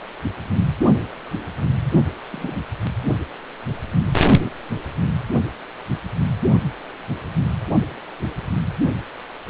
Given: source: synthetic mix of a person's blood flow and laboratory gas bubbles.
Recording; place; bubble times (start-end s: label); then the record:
Doppler ultrasound of blood flow; precordium
2.31-2.56 s: bubbles
4.44-4.50 s: bubbles
From the record:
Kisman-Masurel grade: 122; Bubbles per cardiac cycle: 1 to 2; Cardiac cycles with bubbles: 10 to 50%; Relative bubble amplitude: moderate (0.250 to 0.450); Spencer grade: 2 (many but less than half of the cardiac periods contain bubble signals, singularly or in groups); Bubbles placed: only in the low amplitude regions of the cardiac cycle